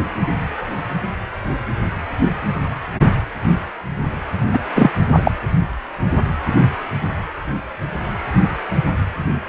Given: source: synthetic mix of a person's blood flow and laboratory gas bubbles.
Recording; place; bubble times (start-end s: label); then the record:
Doppler ultrasound of blood flow; precordium
4.54-4.59 s: bubbles
4.75-4.91 s: bubbles
5.12-5.32 s: bubbles
From the record:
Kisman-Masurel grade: 213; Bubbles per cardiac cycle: several, 3 to 8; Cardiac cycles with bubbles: 1 to 10%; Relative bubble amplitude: loud (0.450 to 0.775); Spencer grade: 1 (occasional bubble signal discernible with the cardiac motion signal, with majority of cardiac periods free of bubbles); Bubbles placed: anywhere in the cardiac cycle